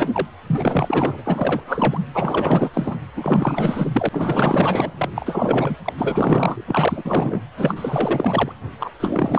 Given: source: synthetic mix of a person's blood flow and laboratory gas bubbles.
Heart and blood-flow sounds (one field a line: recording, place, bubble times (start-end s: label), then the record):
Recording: Doppler ultrasound of blood flow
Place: precordium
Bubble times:
0.00-0.08 s: bubbles
0.13-0.27 s: bubbles
0.46-1.23 s: bubbles
1.26-2.00 s: bubbles
2.14-2.71 s: bubbles
2.73-2.97 s: bubbles
3.16-4.09 s: bubbles
4.12-5.09 s: bubbles
5.15-5.76 s: bubbles
5.84-5.93 s: bubbles
5.97-6.64 s: bubbles
6.67-7.41 s: bubbles
7.57-8.52 s: bubbles
8.80-8.92 s: bubbles
9.00-9.39 s: bubbles
From the record:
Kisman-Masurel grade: 444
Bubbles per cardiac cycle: continuous sound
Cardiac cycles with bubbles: 100%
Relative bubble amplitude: maximal (0.775 to 0.999)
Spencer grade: 4 (maximum detectable bubble signal sounding continuously throughout systole and diastole of every cardiac period, and overriding the amplitude of the normal cardiac signals)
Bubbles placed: anywhere in the cardiac cycle